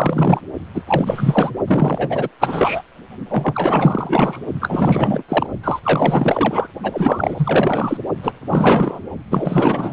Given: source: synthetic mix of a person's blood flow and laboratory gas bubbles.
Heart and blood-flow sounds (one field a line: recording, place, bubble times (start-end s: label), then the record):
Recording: Doppler ultrasound of blood flow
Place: precordium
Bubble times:
0.00-0.41 s: bubbles
0.75-0.82 s: bubbles
0.86-1.51 s: bubbles
1.67-2.29 s: bubbles
2.40-2.82 s: bubbles
3.29-4.39 s: bubbles
4.61-5.23 s: bubbles
5.29-5.47 s: bubbles
5.63-5.80 s: bubbles
5.83-6.67 s: bubbles
6.83-7.98 s: bubbles
8.22-8.32 s: bubbles
8.48-9.00 s: bubbles
9.30-9.92 s: bubbles
From the record:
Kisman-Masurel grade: 444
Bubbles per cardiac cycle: continuous sound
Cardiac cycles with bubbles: 100%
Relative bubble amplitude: maximal (0.775 to 0.999)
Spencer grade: 4 (maximum detectable bubble signal sounding continuously throughout systole and diastole of every cardiac period, and overriding the amplitude of the normal cardiac signals)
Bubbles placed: only in the low amplitude regions of the cardiac cycle